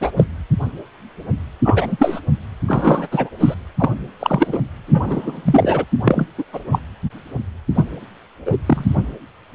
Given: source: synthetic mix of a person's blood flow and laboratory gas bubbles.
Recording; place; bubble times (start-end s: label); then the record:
Doppler ultrasound of blood flow; precordium
0.00-0.11 s: bubbles
0.17-0.24 s: bubbles
1.64-2.20 s: bubbles
2.68-3.06 s: bubbles
3.11-3.29 s: bubbles
3.39-3.54 s: bubbles
3.78-3.90 s: bubbles
4.19-4.58 s: bubbles
4.88-5.84 s: bubbles
6.04-6.26 s: bubbles
6.38-6.44 s: bubbles
6.53-6.59 s: bubbles
6.71-6.79 s: bubbles
7.75-7.84 s: bubbles
8.45-8.57 s: bubbles
8.66-8.93 s: bubbles
From the record:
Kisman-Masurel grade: 233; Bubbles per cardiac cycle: several, 3 to 8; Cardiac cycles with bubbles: 50 to 99%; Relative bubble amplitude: loud (0.450 to 0.775); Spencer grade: 3 (all of the cardiac periods contain showers or single bubble signals, but not dominating or overriding the cardiac motion signals); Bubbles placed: anywhere in the cardiac cycle